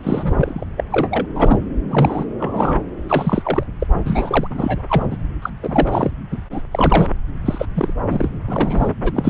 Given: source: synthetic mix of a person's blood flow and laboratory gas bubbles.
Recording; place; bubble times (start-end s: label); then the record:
Doppler ultrasound of blood flow; subclavian vein
0.00-0.65 s: bubbles
0.77-0.84 s: bubbles
0.91-1.26 s: bubbles
1.34-1.58 s: bubbles
1.91-2.25 s: bubbles
2.39-2.83 s: bubbles
3.08-3.64 s: bubbles
3.80-3.87 s: bubbles
4.05-4.48 s: bubbles
4.50-4.82 s: bubbles
4.89-5.07 s: bubbles
5.11-5.17 s: bubbles
5.42-5.50 s: bubbles
5.63-6.11 s: bubbles
6.31-6.37 s: bubbles
6.51-6.61 s: bubbles
6.71-7.09 s: bubbles
7.45-7.66 s: bubbles
7.75-7.94 s: bubbles
8.10-8.29 s: bubbles
8.47-8.92 s: bubbles
9.03-9.30 s: bubbles
From the record:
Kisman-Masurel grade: 342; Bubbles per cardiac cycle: rolling drumbeat, 9 or more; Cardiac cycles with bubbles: 100%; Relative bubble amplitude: moderate (0.250 to 0.450); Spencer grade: 3 (all of the cardiac periods contain showers or single bubble signals, but not dominating or overriding the cardiac motion signals); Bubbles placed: anywhere in the cardiac cycle